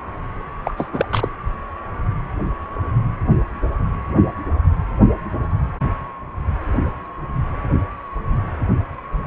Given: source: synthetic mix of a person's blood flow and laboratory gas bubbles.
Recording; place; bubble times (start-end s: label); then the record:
Doppler ultrasound of blood flow; precordium
0.65-0.88 s: bubbles
0.92-1.06 s: bubbles
1.10-1.29 s: bubbles
From the record:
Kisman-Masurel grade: 212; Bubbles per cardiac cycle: several, 3 to 8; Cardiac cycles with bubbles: 1 to 10%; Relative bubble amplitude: moderate (0.250 to 0.450); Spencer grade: 1 (occasional bubble signal discernible with the cardiac motion signal, with majority of cardiac periods free of bubbles); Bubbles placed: anywhere in the cardiac cycle